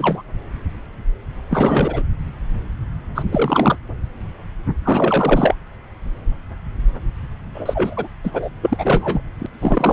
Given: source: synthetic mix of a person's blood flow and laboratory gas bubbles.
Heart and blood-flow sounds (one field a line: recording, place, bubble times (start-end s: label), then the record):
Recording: Doppler ultrasound of blood flow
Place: subclavian vein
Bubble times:
0.00-0.22 s: bubbles
1.49-2.03 s: bubbles
3.15-3.23 s: bubbles
3.31-3.77 s: bubbles
4.84-5.54 s: bubbles
7.54-8.08 s: bubbles
8.24-8.50 s: bubbles
8.62-9.21 s: bubbles
9.39-9.46 s: bubbles
9.61-9.93 s: bubbles
From the record:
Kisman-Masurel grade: 333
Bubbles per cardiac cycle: rolling drumbeat, 9 or more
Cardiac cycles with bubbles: 50 to 99%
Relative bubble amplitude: loud (0.450 to 0.775)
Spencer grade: 3 (all of the cardiac periods contain showers or single bubble signals, but not dominating or overriding the cardiac motion signals)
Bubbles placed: anywhere in the cardiac cycle